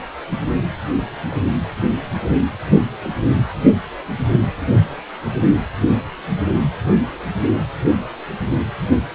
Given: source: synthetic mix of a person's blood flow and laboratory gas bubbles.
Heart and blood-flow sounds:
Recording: Doppler ultrasound of blood flow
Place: precordium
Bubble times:
no bubbles
From the record:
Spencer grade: 0 (complete lack of bubble signals)

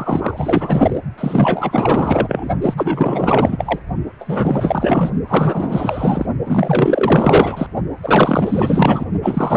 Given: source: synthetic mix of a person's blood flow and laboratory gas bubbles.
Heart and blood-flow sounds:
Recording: Doppler ultrasound of blood flow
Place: precordium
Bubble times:
0.00-1.00 s: bubbles
1.17-2.49 s: bubbles
2.61-2.74 s: bubbles
2.77-3.79 s: bubbles
4.19-5.11 s: bubbles
5.28-6.26 s: bubbles
6.46-7.67 s: bubbles
8.03-9.05 s: bubbles
9.22-9.56 s: bubbles
From the record:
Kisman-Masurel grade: 444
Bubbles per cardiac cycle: continuous sound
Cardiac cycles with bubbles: 100%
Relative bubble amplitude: maximal (0.775 to 0.999)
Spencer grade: 4 (maximum detectable bubble signal sounding continuously throughout systole and diastole of every cardiac period, and overriding the amplitude of the normal cardiac signals)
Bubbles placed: only in the low amplitude regions of the cardiac cycle

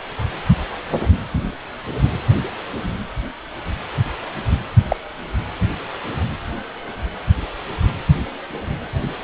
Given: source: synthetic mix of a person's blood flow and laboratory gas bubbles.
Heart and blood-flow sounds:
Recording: Doppler ultrasound of blood flow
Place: precordium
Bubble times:
4.89-4.96 s: bubbles
From the record:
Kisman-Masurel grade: 113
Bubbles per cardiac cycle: 1 to 2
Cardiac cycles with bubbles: 1 to 10%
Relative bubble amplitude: loud (0.450 to 0.775)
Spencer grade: 1 (occasional bubble signal discernible with the cardiac motion signal, with majority of cardiac periods free of bubbles)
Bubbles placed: anywhere in the cardiac cycle

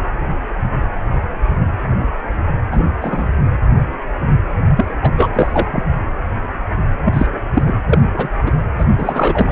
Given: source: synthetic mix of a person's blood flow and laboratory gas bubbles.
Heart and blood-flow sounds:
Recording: Doppler ultrasound of blood flow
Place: precordium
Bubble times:
2.71-2.84 s: bubbles
3.01-3.30 s: bubbles
4.77-4.86 s: bubbles
5.02-5.10 s: bubbles
5.17-5.29 s: bubbles
5.33-5.84 s: bubbles
7.04-7.27 s: bubbles
7.54-7.63 s: bubbles
7.67-7.75 s: bubbles
7.89-8.02 s: bubbles
8.13-8.29 s: bubbles
8.46-8.52 s: bubbles
8.78-8.84 s: bubbles
8.97-9.52 s: bubbles
From the record:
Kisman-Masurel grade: 233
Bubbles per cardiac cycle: several, 3 to 8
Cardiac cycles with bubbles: 50 to 99%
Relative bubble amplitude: loud (0.450 to 0.775)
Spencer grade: 3 (all of the cardiac periods contain showers or single bubble signals, but not dominating or overriding the cardiac motion signals)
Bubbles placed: anywhere in the cardiac cycle

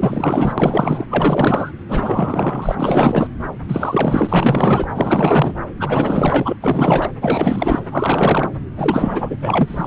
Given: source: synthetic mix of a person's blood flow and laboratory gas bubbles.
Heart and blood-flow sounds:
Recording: Doppler ultrasound of blood flow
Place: subclavian vein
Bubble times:
0.00-0.53 s: bubbles
0.58-1.06 s: bubbles
1.10-1.71 s: bubbles
1.89-2.75 s: bubbles
2.79-3.27 s: bubbles
3.68-4.88 s: bubbles
4.94-5.53 s: bubbles
5.77-6.57 s: bubbles
6.62-7.09 s: bubbles
7.21-7.81 s: bubbles
7.91-8.49 s: bubbles
8.76-9.36 s: bubbles
9.42-9.87 s: bubbles
From the record:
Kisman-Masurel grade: 444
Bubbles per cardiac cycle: continuous sound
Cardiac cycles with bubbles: 100%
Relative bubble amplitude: maximal (0.775 to 0.999)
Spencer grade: 4 (maximum detectable bubble signal sounding continuously throughout systole and diastole of every cardiac period, and overriding the amplitude of the normal cardiac signals)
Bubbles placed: anywhere in the cardiac cycle

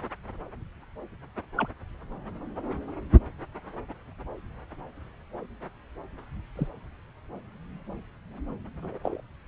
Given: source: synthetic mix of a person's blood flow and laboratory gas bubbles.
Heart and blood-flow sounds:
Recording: Doppler ultrasound of blood flow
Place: subclavian vein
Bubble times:
1.57-1.68 s: bubbles
6.55-6.67 s: bubbles
8.82-8.98 s: bubbles
9.03-9.21 s: bubbles
From the record:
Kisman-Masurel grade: 121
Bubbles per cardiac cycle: 1 to 2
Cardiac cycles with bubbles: 10 to 50%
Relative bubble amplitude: barely perceptible (0.100 to 0.250)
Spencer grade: 2 (many but less than half of the cardiac periods contain bubble signals, singularly or in groups)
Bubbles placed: anywhere in the cardiac cycle

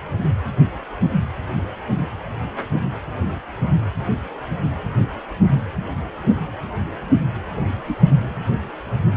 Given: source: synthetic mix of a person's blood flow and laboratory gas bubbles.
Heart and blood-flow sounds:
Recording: Doppler ultrasound of blood flow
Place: precordium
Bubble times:
7.57-7.66 s: bubbles
7.85-8.01 s: bubbles
8.13-8.37 s: bubbles
From the record:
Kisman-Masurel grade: 211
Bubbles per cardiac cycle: several, 3 to 8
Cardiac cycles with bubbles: 1 to 10%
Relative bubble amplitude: barely perceptible (0.100 to 0.250)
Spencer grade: 1 (occasional bubble signal discernible with the cardiac motion signal, with majority of cardiac periods free of bubbles)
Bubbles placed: anywhere in the cardiac cycle

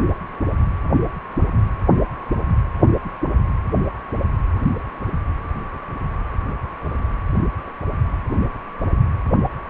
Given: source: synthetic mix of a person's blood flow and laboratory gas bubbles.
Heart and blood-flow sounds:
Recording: Doppler ultrasound of blood flow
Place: precordium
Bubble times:
6.84-6.90 s: bubbles
From the record:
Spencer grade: 1 (occasional bubble signal discernible with the cardiac motion signal, with majority of cardiac periods free of bubbles)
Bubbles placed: anywhere in the cardiac cycle

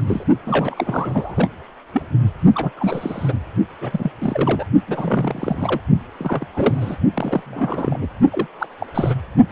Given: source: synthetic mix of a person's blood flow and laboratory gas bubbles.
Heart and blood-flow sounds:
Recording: Doppler ultrasound of blood flow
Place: precordium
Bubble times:
0.00-0.24 s: bubbles
0.47-1.48 s: bubbles
1.94-2.02 s: bubbles
2.55-2.71 s: bubbles
2.76-3.33 s: bubbles
3.81-4.12 s: bubbles
4.21-4.66 s: bubbles
4.88-5.81 s: bubbles
6.19-6.46 s: bubbles
6.53-6.97 s: bubbles
7.14-7.98 s: bubbles
8.01-8.07 s: bubbles
8.31-8.46 s: bubbles
8.59-8.68 s: bubbles
8.79-8.87 s: bubbles
8.94-9.15 s: bubbles
9.50-9.52 s: bubbles
From the record:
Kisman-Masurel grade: 342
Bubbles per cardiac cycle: rolling drumbeat, 9 or more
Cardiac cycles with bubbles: 100%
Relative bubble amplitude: moderate (0.250 to 0.450)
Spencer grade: 3 (all of the cardiac periods contain showers or single bubble signals, but not dominating or overriding the cardiac motion signals)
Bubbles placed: only in the low amplitude regions of the cardiac cycle

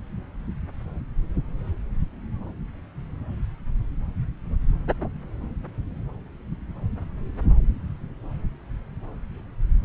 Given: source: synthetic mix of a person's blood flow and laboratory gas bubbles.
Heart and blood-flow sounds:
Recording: Doppler ultrasound of blood flow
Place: subclavian vein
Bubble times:
no bubbles
From the record:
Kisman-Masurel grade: 000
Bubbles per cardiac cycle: 0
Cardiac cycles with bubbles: 0%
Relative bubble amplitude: no bubbles discernible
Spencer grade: 0 (complete lack of bubble signals)

